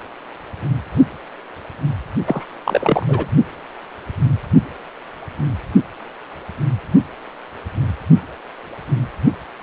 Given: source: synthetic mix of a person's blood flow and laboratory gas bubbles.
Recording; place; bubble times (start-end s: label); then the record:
Doppler ultrasound of blood flow; precordium
2.27-2.46 s: bubbles
2.64-3.26 s: bubbles
From the record:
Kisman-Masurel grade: 212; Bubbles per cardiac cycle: several, 3 to 8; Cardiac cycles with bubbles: 1 to 10%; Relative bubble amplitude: moderate (0.250 to 0.450); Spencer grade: 1 (occasional bubble signal discernible with the cardiac motion signal, with majority of cardiac periods free of bubbles); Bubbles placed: only in the low amplitude regions of the cardiac cycle